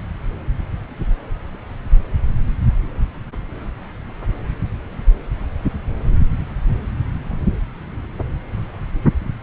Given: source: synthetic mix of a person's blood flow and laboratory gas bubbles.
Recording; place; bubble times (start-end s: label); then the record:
Doppler ultrasound of blood flow; subclavian vein
no bubbles
From the record:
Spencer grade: 0 (complete lack of bubble signals)